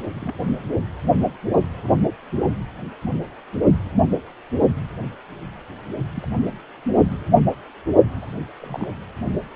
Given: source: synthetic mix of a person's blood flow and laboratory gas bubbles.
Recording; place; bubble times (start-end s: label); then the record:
Doppler ultrasound of blood flow; precordium
0.14-0.35 s: bubbles
6.15-6.26 s: bubbles
7.09-7.21 s: bubbles
7.33-7.43 s: bubbles
8.21-8.27 s: bubbles
8.61-8.87 s: bubbles
From the record:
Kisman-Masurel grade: 121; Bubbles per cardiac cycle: 1 to 2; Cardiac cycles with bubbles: 10 to 50%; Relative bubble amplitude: barely perceptible (0.100 to 0.250); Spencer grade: 2 (many but less than half of the cardiac periods contain bubble signals, singularly or in groups); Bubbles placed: only in the low amplitude regions of the cardiac cycle